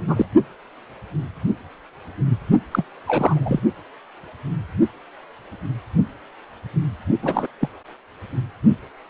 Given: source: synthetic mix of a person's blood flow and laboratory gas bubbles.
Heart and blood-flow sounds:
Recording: Doppler ultrasound of blood flow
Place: precordium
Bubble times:
0.07-0.25 s: bubbles
2.71-2.83 s: bubbles
3.07-3.60 s: bubbles
7.22-7.47 s: bubbles
7.61-7.68 s: bubbles
From the record:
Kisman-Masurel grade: 222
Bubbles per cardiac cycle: several, 3 to 8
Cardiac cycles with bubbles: 10 to 50%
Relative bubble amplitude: moderate (0.250 to 0.450)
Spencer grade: 2 (many but less than half of the cardiac periods contain bubble signals, singularly or in groups)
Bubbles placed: only in the low amplitude regions of the cardiac cycle

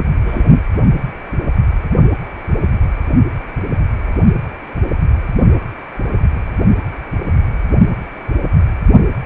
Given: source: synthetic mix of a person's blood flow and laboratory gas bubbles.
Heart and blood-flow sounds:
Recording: Doppler ultrasound of blood flow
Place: precordium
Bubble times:
0.26-0.46 s: bubbles
From the record:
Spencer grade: 1 (occasional bubble signal discernible with the cardiac motion signal, with majority of cardiac periods free of bubbles)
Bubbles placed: only in the low amplitude regions of the cardiac cycle

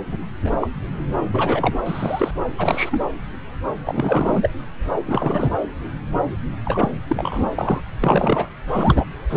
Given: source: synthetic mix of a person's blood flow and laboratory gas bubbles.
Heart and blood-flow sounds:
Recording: Doppler ultrasound of blood flow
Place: subclavian vein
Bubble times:
0.08-0.16 s: bubbles
0.45-0.57 s: bubbles
0.60-0.72 s: bubbles
1.33-1.74 s: bubbles
1.86-2.32 s: bubbles
2.57-3.03 s: bubbles
3.85-4.49 s: bubbles
5.05-5.50 s: bubbles
6.65-6.97 s: bubbles
7.08-7.50 s: bubbles
7.58-7.80 s: bubbles
8.01-8.48 s: bubbles
8.68-9.04 s: bubbles
9.29-9.37 s: bubbles
From the record:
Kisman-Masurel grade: 232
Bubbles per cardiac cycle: several, 3 to 8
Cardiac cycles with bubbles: 50 to 99%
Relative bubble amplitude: moderate (0.250 to 0.450)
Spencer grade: 3 (all of the cardiac periods contain showers or single bubble signals, but not dominating or overriding the cardiac motion signals)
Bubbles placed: anywhere in the cardiac cycle

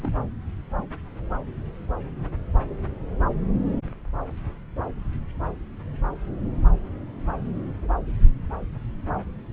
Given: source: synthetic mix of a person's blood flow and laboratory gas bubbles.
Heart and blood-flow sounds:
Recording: Doppler ultrasound of blood flow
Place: subclavian vein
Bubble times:
0.02-0.11 s: bubbles
From the record:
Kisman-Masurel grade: 111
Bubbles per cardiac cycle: 1 to 2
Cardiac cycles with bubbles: 1 to 10%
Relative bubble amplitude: barely perceptible (0.100 to 0.250)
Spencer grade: 1 (occasional bubble signal discernible with the cardiac motion signal, with majority of cardiac periods free of bubbles)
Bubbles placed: anywhere in the cardiac cycle

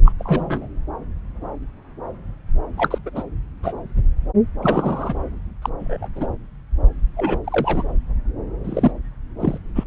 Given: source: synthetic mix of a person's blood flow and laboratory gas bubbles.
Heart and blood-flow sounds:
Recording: Doppler ultrasound of blood flow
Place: subclavian vein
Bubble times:
0.05-0.12 s: bubbles
0.19-0.68 s: bubbles
2.77-2.98 s: bubbles
3.06-3.10 s: bubbles
3.15-3.23 s: bubbles
3.63-3.73 s: bubbles
4.62-5.16 s: bubbles
5.62-5.70 s: bubbles
5.79-6.07 s: bubbles
6.16-6.27 s: bubbles
7.17-7.38 s: bubbles
7.45-7.83 s: bubbles
8.64-8.92 s: bubbles
9.40-9.58 s: bubbles
9.75-9.84 s: bubbles
From the record:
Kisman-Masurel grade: 232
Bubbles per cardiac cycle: several, 3 to 8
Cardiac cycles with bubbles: 50 to 99%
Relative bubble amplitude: moderate (0.250 to 0.450)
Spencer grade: 3 (all of the cardiac periods contain showers or single bubble signals, but not dominating or overriding the cardiac motion signals)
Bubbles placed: anywhere in the cardiac cycle

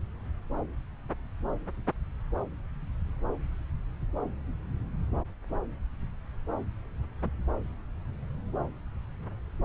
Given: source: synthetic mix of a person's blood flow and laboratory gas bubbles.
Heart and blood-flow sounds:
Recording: Doppler ultrasound of blood flow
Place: subclavian vein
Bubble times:
no bubbles
From the record:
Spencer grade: 0 (complete lack of bubble signals)

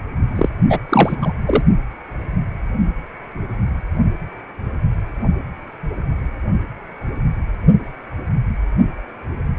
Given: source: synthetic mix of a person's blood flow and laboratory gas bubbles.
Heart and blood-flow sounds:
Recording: Doppler ultrasound of blood flow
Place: precordium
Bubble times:
0.35-0.49 s: bubbles
0.69-0.80 s: bubbles
0.89-1.16 s: bubbles
1.21-1.33 s: bubbles
1.46-1.63 s: bubbles
From the record:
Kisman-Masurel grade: 213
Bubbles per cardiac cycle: several, 3 to 8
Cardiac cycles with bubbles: 1 to 10%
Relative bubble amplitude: loud (0.450 to 0.775)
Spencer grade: 1 (occasional bubble signal discernible with the cardiac motion signal, with majority of cardiac periods free of bubbles)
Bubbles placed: only in the low amplitude regions of the cardiac cycle

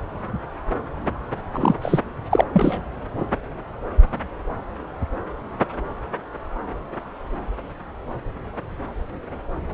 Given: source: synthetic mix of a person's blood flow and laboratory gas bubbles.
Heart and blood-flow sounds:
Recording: Doppler ultrasound of blood flow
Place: subclavian vein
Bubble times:
1.52-1.75 s: bubbles
1.81-2.00 s: bubbles
2.31-2.44 s: bubbles
2.53-2.81 s: bubbles
From the record:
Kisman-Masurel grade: 213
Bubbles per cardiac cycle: several, 3 to 8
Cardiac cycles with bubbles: 1 to 10%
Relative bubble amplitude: loud (0.450 to 0.775)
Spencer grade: 1 (occasional bubble signal discernible with the cardiac motion signal, with majority of cardiac periods free of bubbles)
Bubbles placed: anywhere in the cardiac cycle

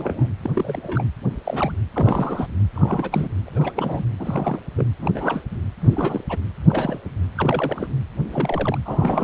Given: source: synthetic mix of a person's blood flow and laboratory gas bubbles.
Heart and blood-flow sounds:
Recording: Doppler ultrasound of blood flow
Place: precordium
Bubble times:
0.00-0.28 s: bubbles
0.42-1.04 s: bubbles
1.44-1.72 s: bubbles
1.94-2.47 s: bubbles
2.75-3.29 s: bubbles
3.46-4.05 s: bubbles
4.19-4.59 s: bubbles
4.76-4.85 s: bubbles
4.99-5.12 s: bubbles
5.14-5.43 s: bubbles
5.80-6.24 s: bubbles
6.29-6.39 s: bubbles
6.67-7.00 s: bubbles
7.35-7.88 s: bubbles
8.31-8.79 s: bubbles
8.85-9.24 s: bubbles
From the record:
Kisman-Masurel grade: 242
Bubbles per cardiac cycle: several, 3 to 8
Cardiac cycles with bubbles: 100%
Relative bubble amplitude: moderate (0.250 to 0.450)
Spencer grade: 3 (all of the cardiac periods contain showers or single bubble signals, but not dominating or overriding the cardiac motion signals)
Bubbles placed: anywhere in the cardiac cycle

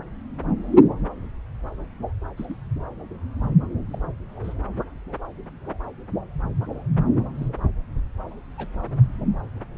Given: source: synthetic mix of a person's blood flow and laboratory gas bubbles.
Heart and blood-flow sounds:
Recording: Doppler ultrasound of blood flow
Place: subclavian vein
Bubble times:
2.37-2.56 s: bubbles
3.91-3.99 s: bubbles
4.43-4.53 s: bubbles
7.35-7.49 s: bubbles
8.57-8.68 s: bubbles
From the record:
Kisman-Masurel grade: 121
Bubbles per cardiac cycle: 1 to 2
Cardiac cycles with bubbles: 10 to 50%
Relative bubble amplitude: barely perceptible (0.100 to 0.250)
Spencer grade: 2 (many but less than half of the cardiac periods contain bubble signals, singularly or in groups)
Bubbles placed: anywhere in the cardiac cycle

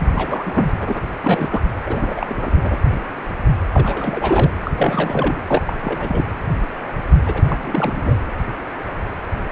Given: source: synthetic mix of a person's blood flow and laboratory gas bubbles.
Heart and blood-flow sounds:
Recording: Doppler ultrasound of blood flow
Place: precordium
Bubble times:
0.00-0.10 s: bubbles
0.16-0.73 s: bubbles
0.80-1.02 s: bubbles
1.22-1.62 s: bubbles
1.86-2.77 s: bubbles
3.72-4.51 s: bubbles
4.65-4.71 s: bubbles
4.78-5.41 s: bubbles
5.46-5.62 s: bubbles
5.67-6.24 s: bubbles
7.25-7.42 s: bubbles
7.48-7.58 s: bubbles
7.62-8.20 s: bubbles
From the record:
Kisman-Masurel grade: 332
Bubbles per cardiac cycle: rolling drumbeat, 9 or more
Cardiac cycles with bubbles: 50 to 99%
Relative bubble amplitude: moderate (0.250 to 0.450)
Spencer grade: 3 (all of the cardiac periods contain showers or single bubble signals, but not dominating or overriding the cardiac motion signals)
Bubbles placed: anywhere in the cardiac cycle

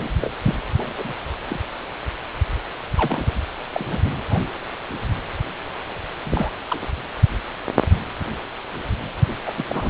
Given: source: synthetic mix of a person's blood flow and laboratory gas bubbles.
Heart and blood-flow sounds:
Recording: Doppler ultrasound of blood flow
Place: precordium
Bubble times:
0.03-0.08 s: bubbles
0.21-0.32 s: bubbles
0.44-0.54 s: bubbles
0.78-1.14 s: bubbles
1.48-1.60 s: bubbles
2.96-3.32 s: bubbles
3.73-3.99 s: bubbles
4.31-4.43 s: bubbles
6.25-6.51 s: bubbles
6.68-6.87 s: bubbles
9.46-9.52 s: bubbles
9.57-9.64 s: bubbles
9.69-9.90 s: bubbles
From the record:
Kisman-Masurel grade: 221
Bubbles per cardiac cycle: several, 3 to 8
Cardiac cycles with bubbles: 10 to 50%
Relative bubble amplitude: barely perceptible (0.100 to 0.250)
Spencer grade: 2 (many but less than half of the cardiac periods contain bubble signals, singularly or in groups)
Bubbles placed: anywhere in the cardiac cycle

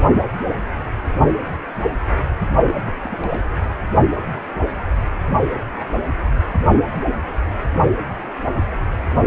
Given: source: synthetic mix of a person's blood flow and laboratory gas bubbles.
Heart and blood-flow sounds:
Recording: Doppler ultrasound of blood flow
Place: precordium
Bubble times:
2.65-2.91 s: bubbles
3.04-3.46 s: bubbles
3.69-3.73 s: bubbles
From the record:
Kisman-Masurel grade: 211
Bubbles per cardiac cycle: several, 3 to 8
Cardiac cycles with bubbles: 1 to 10%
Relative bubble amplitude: barely perceptible (0.100 to 0.250)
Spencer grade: 1 (occasional bubble signal discernible with the cardiac motion signal, with majority of cardiac periods free of bubbles)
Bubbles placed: only in the low amplitude regions of the cardiac cycle

